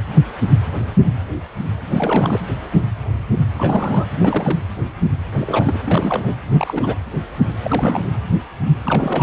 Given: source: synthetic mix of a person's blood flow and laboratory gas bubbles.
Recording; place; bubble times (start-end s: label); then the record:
Doppler ultrasound of blood flow; precordium
1.88-2.40 s: bubbles
3.56-4.05 s: bubbles
4.14-4.59 s: bubbles
5.33-5.78 s: bubbles
5.85-6.33 s: bubbles
6.54-6.96 s: bubbles
7.63-8.08 s: bubbles
8.85-9.23 s: bubbles
From the record:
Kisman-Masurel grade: 332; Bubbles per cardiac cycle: rolling drumbeat, 9 or more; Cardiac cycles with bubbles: 50 to 99%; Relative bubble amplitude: moderate (0.250 to 0.450); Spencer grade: 3 (all of the cardiac periods contain showers or single bubble signals, but not dominating or overriding the cardiac motion signals); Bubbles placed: anywhere in the cardiac cycle